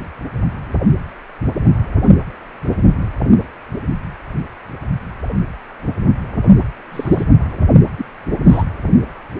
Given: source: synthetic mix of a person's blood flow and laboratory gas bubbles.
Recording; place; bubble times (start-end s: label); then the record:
Doppler ultrasound of blood flow; precordium
6.92-7.23 s: bubbles
7.97-8.05 s: bubbles
8.48-8.64 s: bubbles
From the record:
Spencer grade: 2 (many but less than half of the cardiac periods contain bubble signals, singularly or in groups); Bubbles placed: anywhere in the cardiac cycle